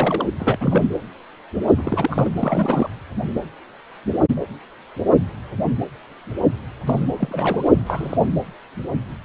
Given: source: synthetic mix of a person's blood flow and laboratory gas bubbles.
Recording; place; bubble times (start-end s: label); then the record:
Doppler ultrasound of blood flow; precordium
0.00-0.27 s: bubbles
0.39-0.58 s: bubbles
0.60-0.89 s: bubbles
1.77-2.30 s: bubbles
2.35-2.90 s: bubbles
6.86-7.01 s: bubbles
7.17-7.68 s: bubbles
7.75-8.17 s: bubbles
From the record:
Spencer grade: 3 (all of the cardiac periods contain showers or single bubble signals, but not dominating or overriding the cardiac motion signals); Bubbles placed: anywhere in the cardiac cycle